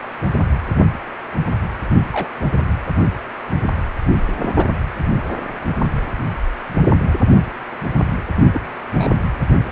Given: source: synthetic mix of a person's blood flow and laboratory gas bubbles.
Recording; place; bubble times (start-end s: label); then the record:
Doppler ultrasound of blood flow; precordium
2.12-2.29 s: bubbles
4.40-4.54 s: bubbles
4.56-4.66 s: bubbles
8.53-8.61 s: bubbles
8.90-9.23 s: bubbles
From the record:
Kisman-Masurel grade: 121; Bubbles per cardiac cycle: 1 to 2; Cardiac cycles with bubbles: 10 to 50%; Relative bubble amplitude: barely perceptible (0.100 to 0.250); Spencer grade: 2 (many but less than half of the cardiac periods contain bubble signals, singularly or in groups); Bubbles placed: anywhere in the cardiac cycle